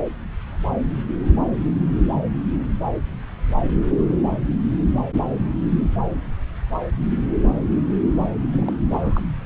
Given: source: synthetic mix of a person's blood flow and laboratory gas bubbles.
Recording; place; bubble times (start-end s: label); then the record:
Doppler ultrasound of blood flow; subclavian vein
8.27-8.35 s: bubbles
8.53-8.74 s: bubbles
8.93-9.22 s: bubbles
From the record:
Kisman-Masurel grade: 211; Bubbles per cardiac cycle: several, 3 to 8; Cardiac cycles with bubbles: 1 to 10%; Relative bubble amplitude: barely perceptible (0.100 to 0.250); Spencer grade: 1 (occasional bubble signal discernible with the cardiac motion signal, with majority of cardiac periods free of bubbles); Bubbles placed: anywhere in the cardiac cycle